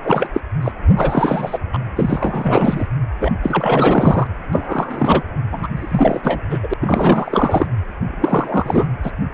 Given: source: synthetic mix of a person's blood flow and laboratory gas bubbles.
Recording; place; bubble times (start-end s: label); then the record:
Doppler ultrasound of blood flow; precordium
0.02-0.29 s: bubbles
0.34-0.40 s: bubbles
0.61-0.72 s: bubbles
0.96-1.58 s: bubbles
1.73-1.79 s: bubbles
1.96-2.87 s: bubbles
3.19-3.31 s: bubbles
3.43-4.27 s: bubbles
4.53-5.24 s: bubbles
5.52-5.67 s: bubbles
5.76-6.41 s: bubbles
6.49-6.58 s: bubbles
6.63-6.73 s: bubbles
6.81-7.67 s: bubbles
8.08-8.87 s: bubbles
9.03-9.12 s: bubbles
From the record:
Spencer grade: 3 (all of the cardiac periods contain showers or single bubble signals, but not dominating or overriding the cardiac motion signals); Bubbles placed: anywhere in the cardiac cycle